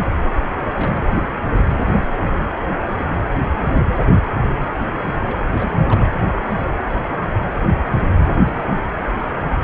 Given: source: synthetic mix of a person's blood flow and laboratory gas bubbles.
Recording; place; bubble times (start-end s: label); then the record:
Doppler ultrasound of blood flow; precordium
0.74-1.06 s: bubbles
1.11-1.31 s: bubbles
1.55-2.04 s: bubbles
3.08-3.14 s: bubbles
3.18-3.26 s: bubbles
3.49-3.62 s: bubbles
3.79-3.83 s: bubbles
3.90-4.04 s: bubbles
5.26-5.37 s: bubbles
5.53-6.11 s: bubbles
8.12-8.25 s: bubbles
8.44-8.65 s: bubbles
From the record:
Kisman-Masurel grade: 221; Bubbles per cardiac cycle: several, 3 to 8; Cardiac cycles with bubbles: 10 to 50%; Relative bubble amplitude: barely perceptible (0.100 to 0.250); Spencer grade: 2 (many but less than half of the cardiac periods contain bubble signals, singularly or in groups); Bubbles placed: anywhere in the cardiac cycle